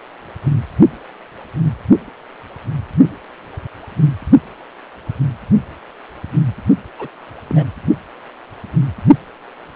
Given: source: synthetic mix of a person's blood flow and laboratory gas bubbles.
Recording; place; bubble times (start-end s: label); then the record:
Doppler ultrasound of blood flow; precordium
6.99-7.08 s: bubbles
7.47-7.66 s: bubbles
From the record:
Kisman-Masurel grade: 211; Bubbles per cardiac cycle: several, 3 to 8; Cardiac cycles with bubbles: 1 to 10%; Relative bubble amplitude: barely perceptible (0.100 to 0.250); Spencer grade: 1 (occasional bubble signal discernible with the cardiac motion signal, with majority of cardiac periods free of bubbles); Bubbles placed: only in the low amplitude regions of the cardiac cycle